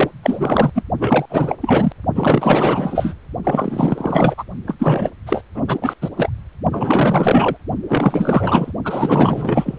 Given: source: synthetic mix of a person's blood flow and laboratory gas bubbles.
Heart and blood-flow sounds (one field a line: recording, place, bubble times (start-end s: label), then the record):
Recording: Doppler ultrasound of blood flow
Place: precordium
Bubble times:
0.00-0.09 s: bubbles
0.23-0.83 s: bubbles
0.99-1.25 s: bubbles
1.29-1.56 s: bubbles
1.61-1.92 s: bubbles
2.15-3.13 s: bubbles
3.44-4.44 s: bubbles
4.67-4.75 s: bubbles
4.79-5.09 s: bubbles
5.26-5.42 s: bubbles
5.54-5.63 s: bubbles
5.67-5.79 s: bubbles
5.82-5.93 s: bubbles
6.01-6.09 s: bubbles
6.17-6.29 s: bubbles
6.71-7.57 s: bubbles
7.88-8.72 s: bubbles
8.85-9.79 s: bubbles
From the record:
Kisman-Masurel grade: 444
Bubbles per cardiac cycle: continuous sound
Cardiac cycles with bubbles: 100%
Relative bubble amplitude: maximal (0.775 to 0.999)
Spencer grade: 4 (maximum detectable bubble signal sounding continuously throughout systole and diastole of every cardiac period, and overriding the amplitude of the normal cardiac signals)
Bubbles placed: only in the low amplitude regions of the cardiac cycle